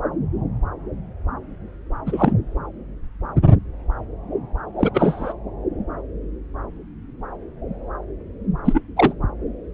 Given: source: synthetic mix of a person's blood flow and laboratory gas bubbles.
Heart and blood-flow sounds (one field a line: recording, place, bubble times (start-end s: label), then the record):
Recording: Doppler ultrasound of blood flow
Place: subclavian vein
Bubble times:
2.06-2.33 s: bubbles
4.79-4.91 s: bubbles
4.94-5.33 s: bubbles
8.64-8.80 s: bubbles
8.96-9.13 s: bubbles
From the record:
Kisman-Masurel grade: 223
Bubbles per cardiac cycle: several, 3 to 8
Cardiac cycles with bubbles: 10 to 50%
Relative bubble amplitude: loud (0.450 to 0.775)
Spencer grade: 2 (many but less than half of the cardiac periods contain bubble signals, singularly or in groups)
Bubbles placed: anywhere in the cardiac cycle